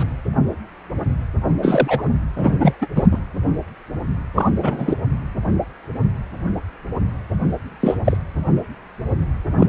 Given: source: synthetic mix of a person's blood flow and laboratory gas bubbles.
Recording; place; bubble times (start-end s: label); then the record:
Doppler ultrasound of blood flow; precordium
0.00-0.03 s: bubbles
1.62-2.03 s: bubbles
2.35-2.74 s: bubbles
2.81-2.87 s: bubbles
2.96-3.07 s: bubbles
3.11-3.23 s: bubbles
4.34-4.50 s: bubbles
4.57-4.96 s: bubbles
7.80-7.98 s: bubbles
8.04-8.17 s: bubbles
9.57-9.67 s: bubbles
From the record:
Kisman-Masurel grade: 223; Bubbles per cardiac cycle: several, 3 to 8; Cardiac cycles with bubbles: 10 to 50%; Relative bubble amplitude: loud (0.450 to 0.775); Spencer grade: 2 (many but less than half of the cardiac periods contain bubble signals, singularly or in groups); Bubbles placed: anywhere in the cardiac cycle